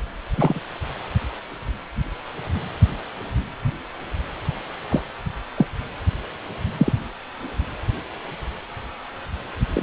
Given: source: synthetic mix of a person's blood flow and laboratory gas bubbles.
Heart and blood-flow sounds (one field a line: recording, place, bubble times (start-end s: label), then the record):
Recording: Doppler ultrasound of blood flow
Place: precordium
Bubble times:
0.37-0.59 s: bubbles
4.89-5.01 s: bubbles
5.56-5.67 s: bubbles
6.77-6.92 s: bubbles
9.74-9.83 s: bubbles
From the record:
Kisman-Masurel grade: 123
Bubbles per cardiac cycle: 1 to 2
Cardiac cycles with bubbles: 10 to 50%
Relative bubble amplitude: loud (0.450 to 0.775)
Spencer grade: 2 (many but less than half of the cardiac periods contain bubble signals, singularly or in groups)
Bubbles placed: anywhere in the cardiac cycle